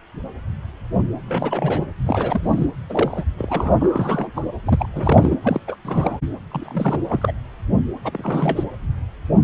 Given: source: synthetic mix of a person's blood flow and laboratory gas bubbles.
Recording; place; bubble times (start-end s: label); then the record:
Doppler ultrasound of blood flow; precordium
1.28-1.86 s: bubbles
2.05-2.66 s: bubbles
2.89-3.24 s: bubbles
3.38-3.76 s: bubbles
3.79-4.28 s: bubbles
4.36-4.42 s: bubbles
4.65-4.89 s: bubbles
4.93-5.36 s: bubbles
5.43-5.61 s: bubbles
5.67-5.76 s: bubbles
5.85-6.20 s: bubbles
6.51-7.00 s: bubbles
7.09-7.33 s: bubbles
8.04-8.64 s: bubbles
From the record:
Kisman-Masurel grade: 332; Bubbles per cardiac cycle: rolling drumbeat, 9 or more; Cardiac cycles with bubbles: 50 to 99%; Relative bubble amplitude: moderate (0.250 to 0.450); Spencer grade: 3 (all of the cardiac periods contain showers or single bubble signals, but not dominating or overriding the cardiac motion signals); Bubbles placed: anywhere in the cardiac cycle